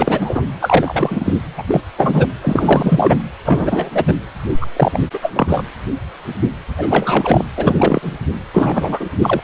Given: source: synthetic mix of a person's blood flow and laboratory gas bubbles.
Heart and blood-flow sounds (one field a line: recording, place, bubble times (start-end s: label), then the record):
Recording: Doppler ultrasound of blood flow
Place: precordium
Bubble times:
0.00-0.42 s: bubbles
0.59-1.34 s: bubbles
1.58-1.63 s: bubbles
1.68-1.80 s: bubbles
1.97-2.27 s: bubbles
2.41-3.21 s: bubbles
3.44-3.90 s: bubbles
3.94-4.05 s: bubbles
4.08-4.13 s: bubbles
4.60-4.66 s: bubbles
4.76-5.02 s: bubbles
5.13-5.19 s: bubbles
5.22-5.67 s: bubbles
6.76-7.45 s: bubbles
7.57-8.12 s: bubbles
8.53-9.09 s: bubbles
9.22-9.41 s: bubbles
From the record:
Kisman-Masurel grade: 333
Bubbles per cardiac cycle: rolling drumbeat, 9 or more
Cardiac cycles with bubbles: 50 to 99%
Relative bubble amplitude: loud (0.450 to 0.775)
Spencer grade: 3 (all of the cardiac periods contain showers or single bubble signals, but not dominating or overriding the cardiac motion signals)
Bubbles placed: anywhere in the cardiac cycle